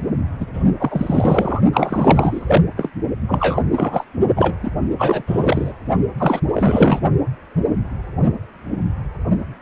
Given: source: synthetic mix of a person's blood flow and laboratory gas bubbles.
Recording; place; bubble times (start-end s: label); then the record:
Doppler ultrasound of blood flow; precordium
0.40-0.46 s: bubbles
0.54-0.72 s: bubbles
0.79-1.60 s: bubbles
1.73-2.62 s: bubbles
2.76-2.90 s: bubbles
3.28-3.62 s: bubbles
3.71-4.04 s: bubbles
4.35-4.55 s: bubbles
4.62-4.71 s: bubbles
4.98-5.23 s: bubbles
5.27-5.73 s: bubbles
6.17-6.40 s: bubbles
6.54-6.99 s: bubbles
From the record:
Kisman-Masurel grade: 333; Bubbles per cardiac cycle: rolling drumbeat, 9 or more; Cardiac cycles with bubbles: 50 to 99%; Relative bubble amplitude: loud (0.450 to 0.775); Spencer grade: 3 (all of the cardiac periods contain showers or single bubble signals, but not dominating or overriding the cardiac motion signals); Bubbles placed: only in the low amplitude regions of the cardiac cycle